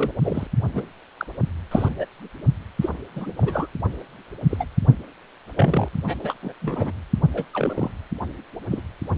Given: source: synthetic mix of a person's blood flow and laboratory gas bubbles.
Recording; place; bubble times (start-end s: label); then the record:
Doppler ultrasound of blood flow; precordium
0.00-0.12 s: bubbles
0.22-0.48 s: bubbles
0.74-0.84 s: bubbles
1.18-1.27 s: bubbles
1.71-1.95 s: bubbles
1.99-2.05 s: bubbles
2.81-2.90 s: bubbles
3.15-3.34 s: bubbles
3.37-3.68 s: bubbles
4.50-4.65 s: bubbles
5.56-5.88 s: bubbles
6.02-6.16 s: bubbles
6.23-6.34 s: bubbles
6.42-6.54 s: bubbles
6.62-6.92 s: bubbles
7.33-7.45 s: bubbles
7.53-7.91 s: bubbles
8.71-8.81 s: bubbles
From the record:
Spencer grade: 3 (all of the cardiac periods contain showers or single bubble signals, but not dominating or overriding the cardiac motion signals); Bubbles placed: only in the low amplitude regions of the cardiac cycle